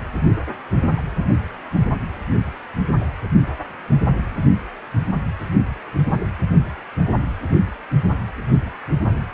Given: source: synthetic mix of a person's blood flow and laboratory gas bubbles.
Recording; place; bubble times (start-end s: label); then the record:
Doppler ultrasound of blood flow; precordium
0.96-1.01 s: bubbles
From the record:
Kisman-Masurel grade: 122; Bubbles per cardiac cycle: 1 to 2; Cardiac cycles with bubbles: 10 to 50%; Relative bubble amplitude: moderate (0.250 to 0.450); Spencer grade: 2 (many but less than half of the cardiac periods contain bubble signals, singularly or in groups); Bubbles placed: anywhere in the cardiac cycle